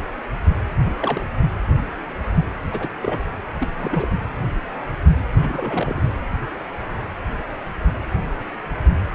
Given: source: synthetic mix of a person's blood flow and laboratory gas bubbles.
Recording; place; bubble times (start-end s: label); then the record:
Doppler ultrasound of blood flow; precordium
0.85-0.92 s: bubbles
0.98-1.24 s: bubbles
2.71-2.89 s: bubbles
3.02-3.19 s: bubbles
3.60-3.67 s: bubbles
3.78-4.08 s: bubbles
5.33-6.15 s: bubbles
From the record:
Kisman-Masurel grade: 221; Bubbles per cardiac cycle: several, 3 to 8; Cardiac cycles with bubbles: 10 to 50%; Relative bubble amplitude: barely perceptible (0.100 to 0.250); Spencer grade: 2 (many but less than half of the cardiac periods contain bubble signals, singularly or in groups); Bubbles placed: anywhere in the cardiac cycle